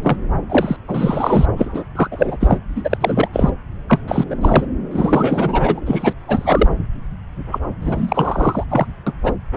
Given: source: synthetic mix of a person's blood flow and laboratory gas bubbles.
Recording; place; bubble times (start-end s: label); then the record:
Doppler ultrasound of blood flow; subclavian vein
0.02-0.17 s: bubbles
0.49-0.76 s: bubbles
0.88-1.46 s: bubbles
1.56-1.84 s: bubbles
1.95-2.08 s: bubbles
2.11-2.37 s: bubbles
2.40-2.58 s: bubbles
2.76-2.98 s: bubbles
3.01-3.28 s: bubbles
3.33-3.50 s: bubbles
3.89-4.00 s: bubbles
4.07-4.24 s: bubbles
4.30-4.35 s: bubbles
4.41-4.67 s: bubbles
4.91-5.80 s: bubbles
5.86-6.13 s: bubbles
6.27-6.68 s: bubbles
7.51-7.59 s: bubbles
7.81-8.64 s: bubbles
8.69-8.87 s: bubbles
9.06-9.12 s: bubbles
9.23-9.33 s: bubbles
From the record:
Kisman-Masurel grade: 343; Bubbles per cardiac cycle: rolling drumbeat, 9 or more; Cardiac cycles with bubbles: 100%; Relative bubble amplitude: loud (0.450 to 0.775); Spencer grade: 3 (all of the cardiac periods contain showers or single bubble signals, but not dominating or overriding the cardiac motion signals); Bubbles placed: anywhere in the cardiac cycle